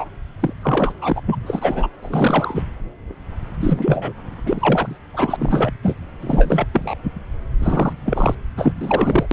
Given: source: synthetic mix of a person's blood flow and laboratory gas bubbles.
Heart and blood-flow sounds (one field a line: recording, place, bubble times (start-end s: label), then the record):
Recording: Doppler ultrasound of blood flow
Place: subclavian vein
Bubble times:
0.00-0.05 s: bubbles
0.40-0.54 s: bubbles
0.62-0.93 s: bubbles
1.01-1.20 s: bubbles
1.26-1.90 s: bubbles
2.02-2.62 s: bubbles
3.60-4.13 s: bubbles
4.45-4.97 s: bubbles
5.14-5.72 s: bubbles
5.81-5.95 s: bubbles
6.22-6.67 s: bubbles
6.73-6.95 s: bubbles
7.60-7.92 s: bubbles
8.05-8.35 s: bubbles
8.57-8.73 s: bubbles
8.80-9.27 s: bubbles
9.31-9.33 s: bubbles
From the record:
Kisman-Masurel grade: 333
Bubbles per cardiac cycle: rolling drumbeat, 9 or more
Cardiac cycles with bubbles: 50 to 99%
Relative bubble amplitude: loud (0.450 to 0.775)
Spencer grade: 3 (all of the cardiac periods contain showers or single bubble signals, but not dominating or overriding the cardiac motion signals)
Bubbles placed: anywhere in the cardiac cycle